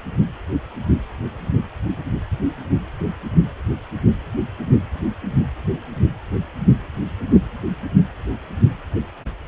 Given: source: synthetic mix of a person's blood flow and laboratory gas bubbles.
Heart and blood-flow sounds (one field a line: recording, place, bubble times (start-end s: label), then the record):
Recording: Doppler ultrasound of blood flow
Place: precordium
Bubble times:
no bubbles
From the record:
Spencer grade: 0 (complete lack of bubble signals)